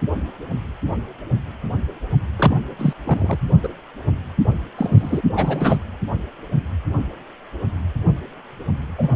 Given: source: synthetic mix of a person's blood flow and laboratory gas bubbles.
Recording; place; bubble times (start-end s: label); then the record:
Doppler ultrasound of blood flow; precordium
2.36-2.56 s: bubbles
2.78-2.94 s: bubbles
3.04-3.39 s: bubbles
3.63-3.69 s: bubbles
4.78-5.21 s: bubbles
5.35-5.77 s: bubbles
8.97-9.09 s: bubbles
From the record:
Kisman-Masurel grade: 222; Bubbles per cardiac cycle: several, 3 to 8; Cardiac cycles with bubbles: 10 to 50%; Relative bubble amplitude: moderate (0.250 to 0.450); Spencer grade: 2 (many but less than half of the cardiac periods contain bubble signals, singularly or in groups); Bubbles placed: anywhere in the cardiac cycle